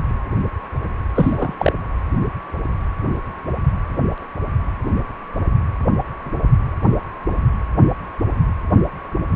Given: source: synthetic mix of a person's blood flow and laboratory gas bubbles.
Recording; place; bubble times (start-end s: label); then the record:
Doppler ultrasound of blood flow; precordium
1.16-1.72 s: bubbles
From the record:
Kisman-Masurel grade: 212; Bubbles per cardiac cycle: several, 3 to 8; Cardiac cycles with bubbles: 1 to 10%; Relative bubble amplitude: moderate (0.250 to 0.450); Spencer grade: 1 (occasional bubble signal discernible with the cardiac motion signal, with majority of cardiac periods free of bubbles); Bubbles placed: anywhere in the cardiac cycle